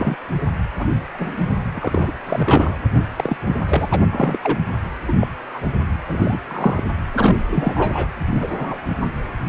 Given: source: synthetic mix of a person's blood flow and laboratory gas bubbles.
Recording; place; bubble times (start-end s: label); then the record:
Doppler ultrasound of blood flow; precordium
0.00-0.16 s: bubbles
0.78-0.85 s: bubbles
1.14-1.44 s: bubbles
1.74-2.12 s: bubbles
2.27-2.77 s: bubbles
3.16-3.37 s: bubbles
3.47-3.59 s: bubbles
3.67-3.87 s: bubbles
3.90-4.00 s: bubbles
4.12-4.38 s: bubbles
4.42-4.58 s: bubbles
5.07-5.12 s: bubbles
5.20-5.28 s: bubbles
5.51-5.59 s: bubbles
6.09-6.41 s: bubbles
6.47-6.84 s: bubbles
7.13-7.37 s: bubbles
7.51-8.07 s: bubbles
8.33-8.77 s: bubbles
From the record:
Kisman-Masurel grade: 233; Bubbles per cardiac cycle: several, 3 to 8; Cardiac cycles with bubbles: 50 to 99%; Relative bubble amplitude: loud (0.450 to 0.775); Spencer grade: 3 (all of the cardiac periods contain showers or single bubble signals, but not dominating or overriding the cardiac motion signals); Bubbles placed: anywhere in the cardiac cycle